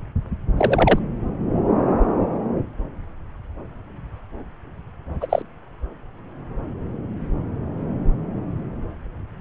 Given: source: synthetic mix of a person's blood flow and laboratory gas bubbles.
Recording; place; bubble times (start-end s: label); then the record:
Doppler ultrasound of blood flow; subclavian vein
0.57-0.99 s: bubbles
5.20-5.27 s: bubbles
5.29-5.42 s: bubbles
From the record:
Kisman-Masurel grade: 113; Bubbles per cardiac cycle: 1 to 2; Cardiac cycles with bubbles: 1 to 10%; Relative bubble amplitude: loud (0.450 to 0.775); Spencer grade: 1 (occasional bubble signal discernible with the cardiac motion signal, with majority of cardiac periods free of bubbles); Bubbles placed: anywhere in the cardiac cycle